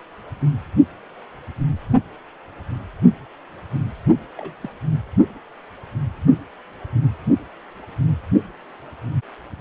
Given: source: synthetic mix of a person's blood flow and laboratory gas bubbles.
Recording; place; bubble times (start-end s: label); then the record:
Doppler ultrasound of blood flow; precordium
4.37-4.59 s: bubbles
4.62-4.69 s: bubbles
From the record:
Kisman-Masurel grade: 111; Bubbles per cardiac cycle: 1 to 2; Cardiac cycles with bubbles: 1 to 10%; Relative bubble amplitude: barely perceptible (0.100 to 0.250); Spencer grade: 1 (occasional bubble signal discernible with the cardiac motion signal, with majority of cardiac periods free of bubbles); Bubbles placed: only in the low amplitude regions of the cardiac cycle